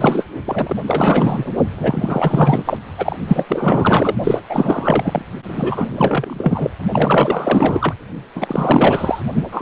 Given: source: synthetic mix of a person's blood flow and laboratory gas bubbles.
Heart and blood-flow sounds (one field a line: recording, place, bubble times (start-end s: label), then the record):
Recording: Doppler ultrasound of blood flow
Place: precordium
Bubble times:
0.00-0.26 s: bubbles
0.44-0.77 s: bubbles
0.87-1.52 s: bubbles
1.78-2.77 s: bubbles
2.98-3.16 s: bubbles
3.27-3.44 s: bubbles
3.48-4.16 s: bubbles
4.24-4.40 s: bubbles
4.49-5.22 s: bubbles
5.45-6.70 s: bubbles
6.93-7.94 s: bubbles
8.35-9.21 s: bubbles
9.31-9.42 s: bubbles
9.52-9.62 s: bubbles
From the record:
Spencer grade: 4 (maximum detectable bubble signal sounding continuously throughout systole and diastole of every cardiac period, and overriding the amplitude of the normal cardiac signals)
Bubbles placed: only in the low amplitude regions of the cardiac cycle